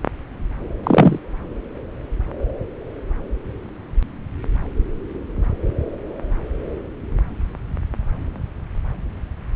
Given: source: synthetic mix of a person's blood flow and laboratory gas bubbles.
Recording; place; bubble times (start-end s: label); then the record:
Doppler ultrasound of blood flow; subclavian vein
0.83-1.19 s: bubbles
From the record:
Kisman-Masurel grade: 123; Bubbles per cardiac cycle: 1 to 2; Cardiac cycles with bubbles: 10 to 50%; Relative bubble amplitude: loud (0.450 to 0.775); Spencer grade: 2 (many but less than half of the cardiac periods contain bubble signals, singularly or in groups); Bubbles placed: anywhere in the cardiac cycle